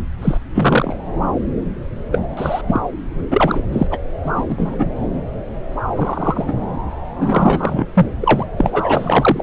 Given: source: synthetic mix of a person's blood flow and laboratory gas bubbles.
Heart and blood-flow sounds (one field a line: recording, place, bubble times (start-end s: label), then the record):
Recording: Doppler ultrasound of blood flow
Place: subclavian vein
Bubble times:
0.22-0.38 s: bubbles
0.55-0.96 s: bubbles
2.11-2.22 s: bubbles
2.37-2.62 s: bubbles
2.67-2.80 s: bubbles
3.31-3.67 s: bubbles
3.72-3.87 s: bubbles
3.91-3.99 s: bubbles
4.25-4.42 s: bubbles
4.48-4.75 s: bubbles
4.78-4.90 s: bubbles
5.96-6.53 s: bubbles
7.19-7.85 s: bubbles
7.94-8.06 s: bubbles
8.21-8.47 s: bubbles
8.56-9.42 s: bubbles
From the record:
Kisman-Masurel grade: 243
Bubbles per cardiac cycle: several, 3 to 8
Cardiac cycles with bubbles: 100%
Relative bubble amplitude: loud (0.450 to 0.775)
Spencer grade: 3 (all of the cardiac periods contain showers or single bubble signals, but not dominating or overriding the cardiac motion signals)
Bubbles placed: anywhere in the cardiac cycle